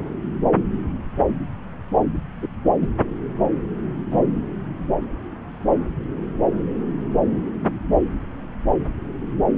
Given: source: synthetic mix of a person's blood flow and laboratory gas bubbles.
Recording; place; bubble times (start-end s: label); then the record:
Doppler ultrasound of blood flow; subclavian vein
2.42-2.48 s: bubbles
2.81-2.87 s: bubbles
4.11-4.24 s: bubbles
From the record:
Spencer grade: 2 (many but less than half of the cardiac periods contain bubble signals, singularly or in groups); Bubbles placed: anywhere in the cardiac cycle